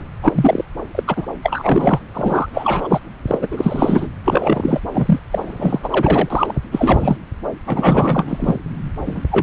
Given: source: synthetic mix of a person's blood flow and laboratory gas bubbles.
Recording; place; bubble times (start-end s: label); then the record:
Doppler ultrasound of blood flow; subclavian vein
0.00-0.03 s: bubbles
0.22-0.65 s: bubbles
0.94-1.03 s: bubbles
1.07-1.26 s: bubbles
1.43-2.00 s: bubbles
2.13-3.00 s: bubbles
3.27-3.38 s: bubbles
3.41-3.48 s: bubbles
3.51-4.08 s: bubbles
4.24-4.81 s: bubbles
4.94-5.20 s: bubbles
5.32-6.59 s: bubbles
6.72-7.17 s: bubbles
7.66-8.59 s: bubbles
9.06-9.21 s: bubbles
9.30-9.43 s: bubbles
From the record:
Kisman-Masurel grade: 343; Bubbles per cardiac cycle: rolling drumbeat, 9 or more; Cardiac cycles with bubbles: 100%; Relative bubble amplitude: loud (0.450 to 0.775); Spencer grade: 3 (all of the cardiac periods contain showers or single bubble signals, but not dominating or overriding the cardiac motion signals); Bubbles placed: anywhere in the cardiac cycle